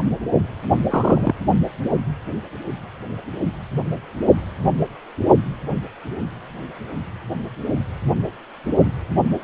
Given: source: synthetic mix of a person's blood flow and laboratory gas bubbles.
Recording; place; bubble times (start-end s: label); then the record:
Doppler ultrasound of blood flow; precordium
0.89-1.33 s: bubbles
From the record:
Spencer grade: 1 (occasional bubble signal discernible with the cardiac motion signal, with majority of cardiac periods free of bubbles); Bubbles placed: only in the low amplitude regions of the cardiac cycle